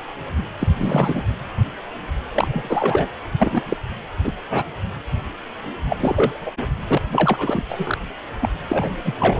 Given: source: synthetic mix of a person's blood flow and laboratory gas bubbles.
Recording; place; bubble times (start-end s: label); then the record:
Doppler ultrasound of blood flow; precordium
0.59-0.68 s: bubbles
0.77-1.23 s: bubbles
2.29-3.08 s: bubbles
3.39-3.62 s: bubbles
3.65-3.77 s: bubbles
4.24-4.33 s: bubbles
4.50-4.63 s: bubbles
5.88-5.97 s: bubbles
6.00-6.50 s: bubbles
6.87-7.04 s: bubbles
7.11-7.63 s: bubbles
7.69-7.98 s: bubbles
8.41-8.49 s: bubbles
8.68-8.89 s: bubbles
9.04-9.14 s: bubbles
9.20-9.40 s: bubbles
From the record:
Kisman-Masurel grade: 332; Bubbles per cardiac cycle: rolling drumbeat, 9 or more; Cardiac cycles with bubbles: 50 to 99%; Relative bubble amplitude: moderate (0.250 to 0.450); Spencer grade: 3 (all of the cardiac periods contain showers or single bubble signals, but not dominating or overriding the cardiac motion signals); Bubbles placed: anywhere in the cardiac cycle